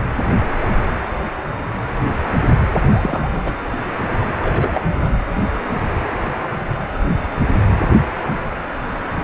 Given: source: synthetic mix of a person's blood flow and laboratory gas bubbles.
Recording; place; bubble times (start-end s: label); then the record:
Doppler ultrasound of blood flow; precordium
2.72-2.79 s: bubbles
2.92-3.53 s: bubbles
4.42-4.80 s: bubbles
5.01-5.11 s: bubbles
From the record:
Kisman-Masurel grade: 222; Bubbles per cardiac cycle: several, 3 to 8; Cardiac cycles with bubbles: 10 to 50%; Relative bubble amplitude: moderate (0.250 to 0.450); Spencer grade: 2 (many but less than half of the cardiac periods contain bubble signals, singularly or in groups); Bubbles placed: anywhere in the cardiac cycle